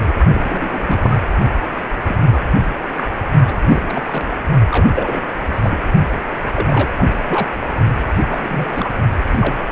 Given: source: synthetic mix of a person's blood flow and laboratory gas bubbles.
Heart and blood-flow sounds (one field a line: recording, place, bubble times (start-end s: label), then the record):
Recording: Doppler ultrasound of blood flow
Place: precordium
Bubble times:
0.00-0.14 s: bubbles
0.33-1.17 s: bubbles
2.04-2.17 s: bubbles
2.30-2.40 s: bubbles
2.96-3.04 s: bubbles
3.46-3.55 s: bubbles
3.68-4.25 s: bubbles
4.70-4.89 s: bubbles
4.95-5.23 s: bubbles
5.54-5.79 s: bubbles
6.53-6.90 s: bubbles
6.97-7.11 s: bubbles
7.29-7.52 s: bubbles
8.29-8.88 s: bubbles
9.31-9.56 s: bubbles
From the record:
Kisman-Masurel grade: 242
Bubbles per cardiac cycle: several, 3 to 8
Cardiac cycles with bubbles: 100%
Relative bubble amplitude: moderate (0.250 to 0.450)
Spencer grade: 3 (all of the cardiac periods contain showers or single bubble signals, but not dominating or overriding the cardiac motion signals)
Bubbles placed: only in the low amplitude regions of the cardiac cycle